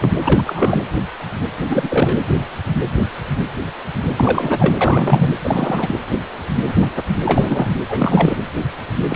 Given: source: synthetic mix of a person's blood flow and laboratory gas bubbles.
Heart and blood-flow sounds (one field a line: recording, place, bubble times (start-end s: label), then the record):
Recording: Doppler ultrasound of blood flow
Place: precordium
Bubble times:
0.00-0.09 s: bubbles
0.20-0.84 s: bubbles
1.69-2.19 s: bubbles
4.17-4.77 s: bubbles
4.81-5.31 s: bubbles
5.44-5.99 s: bubbles
7.25-7.75 s: bubbles
7.88-8.38 s: bubbles
9.08-9.16 s: bubbles
From the record:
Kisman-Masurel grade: 333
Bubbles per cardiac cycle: rolling drumbeat, 9 or more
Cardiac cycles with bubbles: 50 to 99%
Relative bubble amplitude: loud (0.450 to 0.775)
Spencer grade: 3 (all of the cardiac periods contain showers or single bubble signals, but not dominating or overriding the cardiac motion signals)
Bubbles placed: anywhere in the cardiac cycle